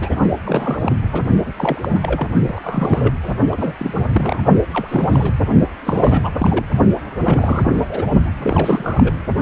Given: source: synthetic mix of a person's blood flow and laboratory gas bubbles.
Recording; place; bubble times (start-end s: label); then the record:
Doppler ultrasound of blood flow; precordium
0.00-0.15 s: bubbles
0.44-0.92 s: bubbles
1.11-1.23 s: bubbles
1.45-1.54 s: bubbles
1.56-1.99 s: bubbles
2.02-2.27 s: bubbles
2.47-2.60 s: bubbles
2.63-3.13 s: bubbles
3.23-3.34 s: bubbles
3.52-3.74 s: bubbles
3.77-4.07 s: bubbles
4.12-4.39 s: bubbles
4.72-5.34 s: bubbles
5.85-6.65 s: bubbles
7.24-7.71 s: bubbles
7.75-7.80 s: bubbles
7.88-8.06 s: bubbles
8.42-9.14 s: bubbles
From the record:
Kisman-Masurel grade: 332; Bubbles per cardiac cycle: rolling drumbeat, 9 or more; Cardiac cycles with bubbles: 50 to 99%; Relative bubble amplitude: moderate (0.250 to 0.450); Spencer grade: 3 (all of the cardiac periods contain showers or single bubble signals, but not dominating or overriding the cardiac motion signals); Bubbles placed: only in the low amplitude regions of the cardiac cycle